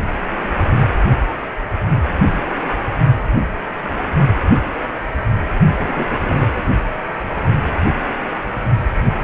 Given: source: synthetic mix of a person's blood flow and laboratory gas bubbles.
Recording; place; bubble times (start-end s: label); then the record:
Doppler ultrasound of blood flow; precordium
5.79-6.65 s: bubbles
From the record:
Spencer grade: 2 (many but less than half of the cardiac periods contain bubble signals, singularly or in groups); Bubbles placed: only in the low amplitude regions of the cardiac cycle